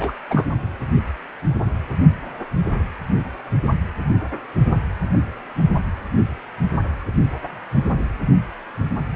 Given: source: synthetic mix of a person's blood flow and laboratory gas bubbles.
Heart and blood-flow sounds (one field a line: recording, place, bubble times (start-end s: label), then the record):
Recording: Doppler ultrasound of blood flow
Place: precordium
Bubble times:
0.00-0.12 s: bubbles
0.30-0.47 s: bubbles
From the record:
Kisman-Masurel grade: 212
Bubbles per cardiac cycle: several, 3 to 8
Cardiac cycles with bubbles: 1 to 10%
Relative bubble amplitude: moderate (0.250 to 0.450)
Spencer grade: 1 (occasional bubble signal discernible with the cardiac motion signal, with majority of cardiac periods free of bubbles)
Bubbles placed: anywhere in the cardiac cycle